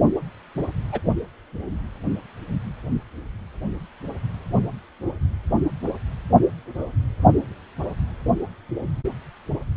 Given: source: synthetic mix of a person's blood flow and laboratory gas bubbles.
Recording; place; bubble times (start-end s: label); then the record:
Doppler ultrasound of blood flow; precordium
0.92-0.99 s: bubbles
From the record:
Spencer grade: 1 (occasional bubble signal discernible with the cardiac motion signal, with majority of cardiac periods free of bubbles); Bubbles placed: anywhere in the cardiac cycle